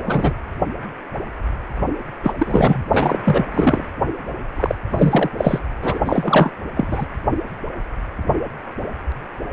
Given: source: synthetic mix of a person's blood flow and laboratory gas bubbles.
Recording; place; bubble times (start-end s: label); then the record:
Doppler ultrasound of blood flow; precordium
0.05-0.34 s: bubbles
2.23-2.32 s: bubbles
2.39-2.83 s: bubbles
2.92-3.19 s: bubbles
3.25-3.46 s: bubbles
3.54-3.84 s: bubbles
4.56-4.75 s: bubbles
4.95-5.30 s: bubbles
5.38-5.59 s: bubbles
5.81-5.99 s: bubbles
6.05-6.50 s: bubbles
6.75-7.06 s: bubbles
From the record:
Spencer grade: 3 (all of the cardiac periods contain showers or single bubble signals, but not dominating or overriding the cardiac motion signals); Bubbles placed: only in the low amplitude regions of the cardiac cycle